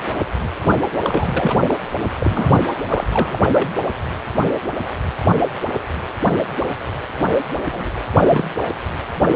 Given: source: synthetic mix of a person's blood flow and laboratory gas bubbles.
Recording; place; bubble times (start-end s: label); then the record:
Doppler ultrasound of blood flow; precordium
1.02-1.57 s: bubbles
1.68-1.79 s: bubbles
2.19-2.64 s: bubbles
2.87-3.04 s: bubbles
3.12-3.39 s: bubbles
3.52-3.70 s: bubbles
7.72-7.90 s: bubbles
8.20-8.44 s: bubbles
From the record:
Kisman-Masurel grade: 222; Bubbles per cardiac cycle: several, 3 to 8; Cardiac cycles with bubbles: 10 to 50%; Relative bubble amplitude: moderate (0.250 to 0.450); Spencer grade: 2 (many but less than half of the cardiac periods contain bubble signals, singularly or in groups); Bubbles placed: anywhere in the cardiac cycle